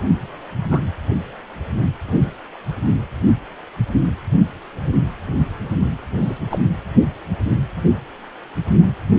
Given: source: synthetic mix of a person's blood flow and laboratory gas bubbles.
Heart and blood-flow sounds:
Doppler ultrasound of blood flow; precordium
0.70-0.80 s: bubbles
2.06-2.31 s: bubbles
6.22-6.38 s: bubbles
6.50-6.59 s: bubbles
From the record:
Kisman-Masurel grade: 122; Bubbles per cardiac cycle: 1 to 2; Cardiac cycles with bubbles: 10 to 50%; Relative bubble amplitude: moderate (0.250 to 0.450); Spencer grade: 2 (many but less than half of the cardiac periods contain bubble signals, singularly or in groups); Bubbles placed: anywhere in the cardiac cycle

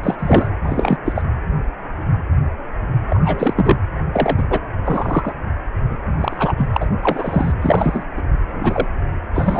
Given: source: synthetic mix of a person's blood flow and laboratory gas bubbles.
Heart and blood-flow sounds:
Doppler ultrasound of blood flow; precordium
0.03-0.15 s: bubbles
0.18-0.54 s: bubbles
0.63-0.97 s: bubbles
1.05-1.22 s: bubbles
3.10-3.77 s: bubbles
4.12-4.44 s: bubbles
4.50-4.60 s: bubbles
4.85-5.34 s: bubbles
5.90-5.98 s: bubbles
6.20-6.53 s: bubbles
6.57-6.67 s: bubbles
6.73-6.77 s: bubbles
6.80-6.87 s: bubbles
7.02-7.52 s: bubbles
7.62-8.03 s: bubbles
8.17-8.21 s: bubbles
8.53-8.87 s: bubbles
9.34-9.60 s: bubbles
From the record:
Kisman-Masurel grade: 233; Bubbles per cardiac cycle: several, 3 to 8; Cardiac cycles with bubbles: 50 to 99%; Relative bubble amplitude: loud (0.450 to 0.775); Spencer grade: 3 (all of the cardiac periods contain showers or single bubble signals, but not dominating or overriding the cardiac motion signals); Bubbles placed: anywhere in the cardiac cycle

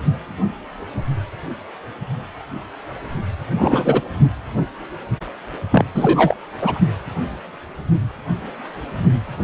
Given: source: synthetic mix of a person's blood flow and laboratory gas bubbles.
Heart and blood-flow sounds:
Doppler ultrasound of blood flow; precordium
3.54-4.01 s: bubbles
5.71-5.85 s: bubbles
5.94-6.36 s: bubbles
6.61-6.79 s: bubbles
From the record:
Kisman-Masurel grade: 223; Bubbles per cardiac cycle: several, 3 to 8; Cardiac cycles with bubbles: 10 to 50%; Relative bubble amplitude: loud (0.450 to 0.775); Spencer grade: 2 (many but less than half of the cardiac periods contain bubble signals, singularly or in groups); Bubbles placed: only in the low amplitude regions of the cardiac cycle

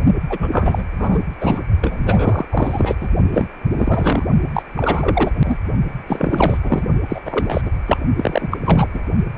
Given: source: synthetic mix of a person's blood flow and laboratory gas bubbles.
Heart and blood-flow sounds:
Doppler ultrasound of blood flow; precordium
0.29-0.83 s: bubbles
0.98-1.19 s: bubbles
1.41-1.61 s: bubbles
1.81-2.46 s: bubbles
2.50-2.95 s: bubbles
3.00-3.08 s: bubbles
3.33-3.46 s: bubbles
3.71-4.25 s: bubbles
4.54-4.62 s: bubbles
4.76-5.31 s: bubbles
5.44-5.58 s: bubbles
6.06-6.58 s: bubbles
6.63-6.83 s: bubbles
7.08-7.20 s: bubbles
7.25-7.61 s: bubbles
7.66-7.71 s: bubbles
7.87-7.97 s: bubbles
8.15-8.48 s: bubbles
8.51-8.57 s: bubbles
8.64-8.88 s: bubbles
8.94-9.00 s: bubbles
From the record:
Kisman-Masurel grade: 343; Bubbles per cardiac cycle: rolling drumbeat, 9 or more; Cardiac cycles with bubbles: 100%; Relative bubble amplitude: loud (0.450 to 0.775); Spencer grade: 3 (all of the cardiac periods contain showers or single bubble signals, but not dominating or overriding the cardiac motion signals); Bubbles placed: only in the low amplitude regions of the cardiac cycle

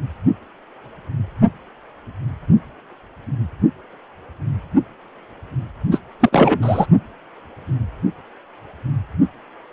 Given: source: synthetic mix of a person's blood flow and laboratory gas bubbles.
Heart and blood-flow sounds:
Doppler ultrasound of blood flow; precordium
5.92-5.99 s: bubbles
6.20-6.29 s: bubbles
6.32-6.86 s: bubbles
From the record:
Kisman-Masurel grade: 213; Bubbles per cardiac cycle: several, 3 to 8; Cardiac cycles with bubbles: 1 to 10%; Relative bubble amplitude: loud (0.450 to 0.775); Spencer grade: 1 (occasional bubble signal discernible with the cardiac motion signal, with majority of cardiac periods free of bubbles); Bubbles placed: only in the low amplitude regions of the cardiac cycle

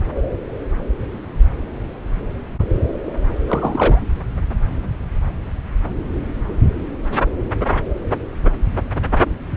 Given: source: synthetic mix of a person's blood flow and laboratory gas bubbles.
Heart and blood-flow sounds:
Doppler ultrasound of blood flow; subclavian vein
3.48-4.02 s: bubbles
From the record:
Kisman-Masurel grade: 112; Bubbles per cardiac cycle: 1 to 2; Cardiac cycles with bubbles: 1 to 10%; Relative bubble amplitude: moderate (0.250 to 0.450); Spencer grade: 1 (occasional bubble signal discernible with the cardiac motion signal, with majority of cardiac periods free of bubbles); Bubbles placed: anywhere in the cardiac cycle

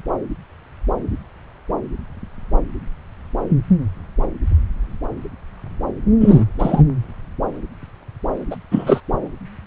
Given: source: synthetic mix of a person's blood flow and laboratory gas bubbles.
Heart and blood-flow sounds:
Doppler ultrasound of blood flow; subclavian vein
6.21-6.45 s: bubbles
6.58-6.83 s: bubbles
8.51-8.56 s: bubbles
8.71-9.01 s: bubbles
From the record:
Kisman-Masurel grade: 223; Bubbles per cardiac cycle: several, 3 to 8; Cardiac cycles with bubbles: 10 to 50%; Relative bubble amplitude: loud (0.450 to 0.775); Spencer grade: 2 (many but less than half of the cardiac periods contain bubble signals, singularly or in groups); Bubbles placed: anywhere in the cardiac cycle

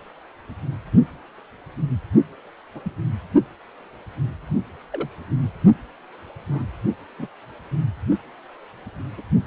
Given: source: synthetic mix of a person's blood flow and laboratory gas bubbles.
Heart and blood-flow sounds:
Doppler ultrasound of blood flow; precordium
2.74-2.80 s: bubbles
2.84-2.92 s: bubbles
4.92-5.08 s: bubbles
6.50-6.63 s: bubbles
7.18-7.27 s: bubbles
9.18-9.22 s: bubbles
From the record:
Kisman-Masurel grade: 121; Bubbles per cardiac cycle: 1 to 2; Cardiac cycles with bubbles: 10 to 50%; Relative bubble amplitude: barely perceptible (0.100 to 0.250); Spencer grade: 2 (many but less than half of the cardiac periods contain bubble signals, singularly or in groups); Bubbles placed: only in the low amplitude regions of the cardiac cycle

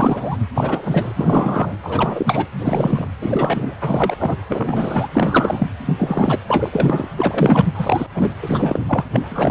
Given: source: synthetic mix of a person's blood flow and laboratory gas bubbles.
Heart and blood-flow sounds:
Doppler ultrasound of blood flow; precordium
0.00-0.36 s: bubbles
0.54-1.12 s: bubbles
1.16-1.76 s: bubbles
1.84-2.46 s: bubbles
2.58-3.08 s: bubbles
3.21-3.75 s: bubbles
3.81-4.15 s: bubbles
4.19-4.36 s: bubbles
4.49-5.08 s: bubbles
5.12-5.68 s: bubbles
5.85-5.96 s: bubbles
5.98-6.39 s: bubbles
6.47-6.69 s: bubbles
6.72-7.08 s: bubbles
7.15-7.65 s: bubbles
7.75-8.07 s: bubbles
8.15-8.31 s: bubbles
8.42-8.82 s: bubbles
8.87-9.04 s: bubbles
9.12-9.28 s: bubbles
9.30-9.51 s: bubbles
From the record:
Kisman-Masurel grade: 342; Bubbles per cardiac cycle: rolling drumbeat, 9 or more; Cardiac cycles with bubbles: 100%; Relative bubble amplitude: moderate (0.250 to 0.450); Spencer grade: 3 (all of the cardiac periods contain showers or single bubble signals, but not dominating or overriding the cardiac motion signals); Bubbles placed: anywhere in the cardiac cycle

